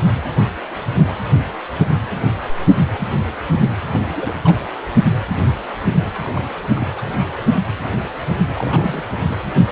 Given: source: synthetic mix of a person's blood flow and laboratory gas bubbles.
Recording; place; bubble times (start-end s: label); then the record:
Doppler ultrasound of blood flow; precordium
3.93-4.38 s: bubbles
4.44-4.59 s: bubbles
6.22-6.48 s: bubbles
6.62-7.01 s: bubbles
8.54-9.03 s: bubbles
9.28-9.34 s: bubbles
From the record:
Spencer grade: 2 (many but less than half of the cardiac periods contain bubble signals, singularly or in groups); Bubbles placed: anywhere in the cardiac cycle